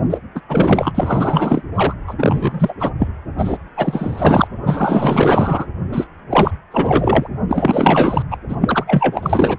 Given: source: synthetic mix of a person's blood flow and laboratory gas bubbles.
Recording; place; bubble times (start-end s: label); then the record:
Doppler ultrasound of blood flow; precordium
0.10-0.18 s: bubbles
0.35-0.41 s: bubbles
0.48-1.63 s: bubbles
1.75-1.93 s: bubbles
2.07-2.15 s: bubbles
2.18-2.74 s: bubbles
2.79-2.90 s: bubbles
2.99-3.08 s: bubbles
3.38-3.58 s: bubbles
3.76-4.47 s: bubbles
4.64-5.67 s: bubbles
5.92-6.07 s: bubbles
6.29-6.51 s: bubbles
6.71-7.28 s: bubbles
7.48-8.23 s: bubbles
8.31-8.37 s: bubbles
8.48-8.56 s: bubbles
8.61-8.84 s: bubbles
8.87-9.57 s: bubbles
From the record:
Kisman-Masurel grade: 444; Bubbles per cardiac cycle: continuous sound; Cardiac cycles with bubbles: 100%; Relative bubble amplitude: maximal (0.775 to 0.999); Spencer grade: 4 (maximum detectable bubble signal sounding continuously throughout systole and diastole of every cardiac period, and overriding the amplitude of the normal cardiac signals); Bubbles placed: anywhere in the cardiac cycle